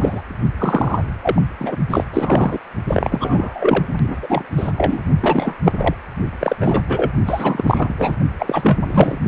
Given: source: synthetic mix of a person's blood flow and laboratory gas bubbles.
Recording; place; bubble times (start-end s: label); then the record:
Doppler ultrasound of blood flow; precordium
0.00-0.21 s: bubbles
0.58-1.02 s: bubbles
1.22-1.42 s: bubbles
1.59-1.76 s: bubbles
1.89-2.05 s: bubbles
2.13-2.58 s: bubbles
2.88-3.84 s: bubbles
4.07-4.48 s: bubbles
4.56-4.71 s: bubbles
4.77-4.98 s: bubbles
5.21-5.57 s: bubbles
5.63-5.72 s: bubbles
5.77-5.95 s: bubbles
6.39-6.56 s: bubbles
6.60-6.82 s: bubbles
6.88-7.11 s: bubbles
7.26-7.94 s: bubbles
7.98-8.17 s: bubbles
8.38-8.79 s: bubbles
8.86-9.19 s: bubbles
From the record:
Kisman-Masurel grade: 333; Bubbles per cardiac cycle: rolling drumbeat, 9 or more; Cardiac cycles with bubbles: 50 to 99%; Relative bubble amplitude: loud (0.450 to 0.775); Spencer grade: 3 (all of the cardiac periods contain showers or single bubble signals, but not dominating or overriding the cardiac motion signals); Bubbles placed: only in the low amplitude regions of the cardiac cycle